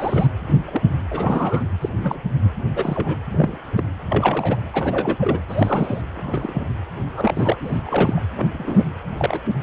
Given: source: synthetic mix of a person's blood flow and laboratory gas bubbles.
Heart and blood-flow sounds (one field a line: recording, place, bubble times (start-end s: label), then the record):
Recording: Doppler ultrasound of blood flow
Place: precordium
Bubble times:
0.00-0.31 s: bubbles
0.48-0.52 s: bubbles
0.66-0.81 s: bubbles
1.10-1.65 s: bubbles
1.81-1.89 s: bubbles
1.98-2.18 s: bubbles
2.68-3.18 s: bubbles
3.29-3.58 s: bubbles
3.72-3.84 s: bubbles
4.09-4.60 s: bubbles
4.73-5.17 s: bubbles
5.20-5.39 s: bubbles
5.48-6.01 s: bubbles
6.16-6.63 s: bubbles
7.15-7.60 s: bubbles
7.63-7.80 s: bubbles
7.86-8.20 s: bubbles
8.36-8.83 s: bubbles
9.17-9.39 s: bubbles
From the record:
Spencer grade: 3 (all of the cardiac periods contain showers or single bubble signals, but not dominating or overriding the cardiac motion signals)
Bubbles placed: anywhere in the cardiac cycle